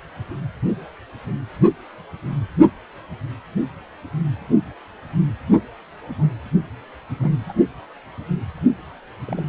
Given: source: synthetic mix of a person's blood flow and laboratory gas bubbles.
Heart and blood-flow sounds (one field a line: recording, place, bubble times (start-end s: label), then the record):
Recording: Doppler ultrasound of blood flow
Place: precordium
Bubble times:
6.19-6.30 s: bubbles
7.20-7.29 s: bubbles
7.49-7.53 s: bubbles
9.27-9.40 s: bubbles
From the record:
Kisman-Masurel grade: 121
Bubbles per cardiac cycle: 1 to 2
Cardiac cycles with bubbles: 10 to 50%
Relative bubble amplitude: barely perceptible (0.100 to 0.250)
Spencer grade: 2 (many but less than half of the cardiac periods contain bubble signals, singularly or in groups)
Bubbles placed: only in the low amplitude regions of the cardiac cycle